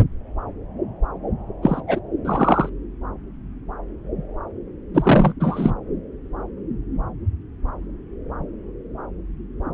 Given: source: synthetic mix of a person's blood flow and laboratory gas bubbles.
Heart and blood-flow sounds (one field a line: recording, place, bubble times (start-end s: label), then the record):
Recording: Doppler ultrasound of blood flow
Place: subclavian vein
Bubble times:
1.62-1.82 s: bubbles
1.87-2.00 s: bubbles
2.24-2.69 s: bubbles
4.94-5.33 s: bubbles
5.40-5.72 s: bubbles
From the record:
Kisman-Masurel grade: 223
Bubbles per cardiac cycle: several, 3 to 8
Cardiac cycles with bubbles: 10 to 50%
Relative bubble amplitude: loud (0.450 to 0.775)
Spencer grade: 2 (many but less than half of the cardiac periods contain bubble signals, singularly or in groups)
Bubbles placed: anywhere in the cardiac cycle